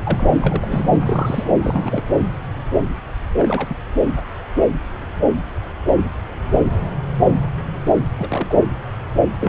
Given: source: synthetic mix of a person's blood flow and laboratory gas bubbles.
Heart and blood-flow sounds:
Doppler ultrasound of blood flow; subclavian vein
0.03-0.31 s: bubbles
0.42-0.87 s: bubbles
1.01-1.51 s: bubbles
1.60-2.02 s: bubbles
3.37-3.76 s: bubbles
8.14-8.64 s: bubbles
9.39-9.49 s: bubbles
From the record:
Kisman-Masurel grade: 222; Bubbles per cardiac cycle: several, 3 to 8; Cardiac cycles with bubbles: 10 to 50%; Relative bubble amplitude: moderate (0.250 to 0.450); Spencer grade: 2 (many but less than half of the cardiac periods contain bubble signals, singularly or in groups); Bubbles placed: anywhere in the cardiac cycle

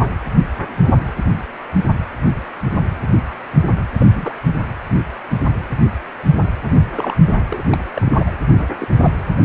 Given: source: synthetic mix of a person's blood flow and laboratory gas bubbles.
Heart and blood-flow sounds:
Doppler ultrasound of blood flow; precordium
3.99-4.07 s: bubbles
4.15-4.35 s: bubbles
6.76-6.82 s: bubbles
6.96-7.17 s: bubbles
7.49-7.62 s: bubbles
7.72-7.78 s: bubbles
7.94-8.31 s: bubbles
8.57-8.65 s: bubbles
8.78-8.88 s: bubbles
8.97-9.12 s: bubbles
From the record:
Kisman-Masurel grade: 222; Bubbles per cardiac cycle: several, 3 to 8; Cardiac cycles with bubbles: 10 to 50%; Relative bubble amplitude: moderate (0.250 to 0.450); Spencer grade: 2 (many but less than half of the cardiac periods contain bubble signals, singularly or in groups); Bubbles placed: anywhere in the cardiac cycle

